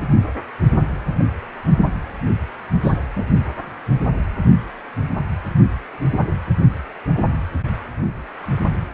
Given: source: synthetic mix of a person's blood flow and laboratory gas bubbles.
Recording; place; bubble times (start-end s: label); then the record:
Doppler ultrasound of blood flow; precordium
2.82-2.99 s: bubbles
3.16-3.28 s: bubbles
From the record:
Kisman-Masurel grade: 212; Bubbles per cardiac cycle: several, 3 to 8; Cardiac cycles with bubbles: 1 to 10%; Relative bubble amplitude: moderate (0.250 to 0.450); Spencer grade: 1 (occasional bubble signal discernible with the cardiac motion signal, with majority of cardiac periods free of bubbles); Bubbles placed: only in the low amplitude regions of the cardiac cycle